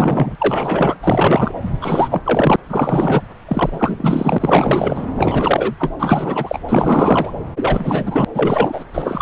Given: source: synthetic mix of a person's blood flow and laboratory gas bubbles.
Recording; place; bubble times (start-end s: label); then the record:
Doppler ultrasound of blood flow; subclavian vein
0.00-0.36 s: bubbles
0.38-0.95 s: bubbles
1.02-1.51 s: bubbles
1.81-2.56 s: bubbles
2.62-3.22 s: bubbles
3.48-5.07 s: bubbles
5.17-5.75 s: bubbles
5.79-5.92 s: bubbles
5.99-6.59 s: bubbles
6.69-7.32 s: bubbles
7.56-8.25 s: bubbles
8.34-8.84 s: bubbles
8.93-9.22 s: bubbles
From the record:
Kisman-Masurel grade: 444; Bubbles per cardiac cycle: continuous sound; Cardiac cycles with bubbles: 100%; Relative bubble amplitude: maximal (0.775 to 0.999); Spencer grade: 4 (maximum detectable bubble signal sounding continuously throughout systole and diastole of every cardiac period, and overriding the amplitude of the normal cardiac signals); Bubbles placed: anywhere in the cardiac cycle